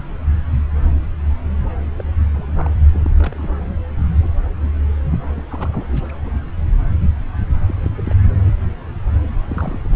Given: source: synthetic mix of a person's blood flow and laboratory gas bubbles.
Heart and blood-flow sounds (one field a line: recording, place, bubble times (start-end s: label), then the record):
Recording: Doppler ultrasound of blood flow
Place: subclavian vein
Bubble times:
1.99-2.04 s: bubbles
2.32-2.71 s: bubbles
2.93-3.15 s: bubbles
3.18-3.53 s: bubbles
5.12-5.17 s: bubbles
5.28-5.43 s: bubbles
5.50-6.01 s: bubbles
6.09-6.13 s: bubbles
6.24-6.31 s: bubbles
7.66-7.91 s: bubbles
7.97-8.01 s: bubbles
8.04-8.14 s: bubbles
9.40-9.80 s: bubbles
9.84-9.96 s: bubbles
From the record:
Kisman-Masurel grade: 221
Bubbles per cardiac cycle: several, 3 to 8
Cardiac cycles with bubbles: 10 to 50%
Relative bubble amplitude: barely perceptible (0.100 to 0.250)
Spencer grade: 2 (many but less than half of the cardiac periods contain bubble signals, singularly or in groups)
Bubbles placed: anywhere in the cardiac cycle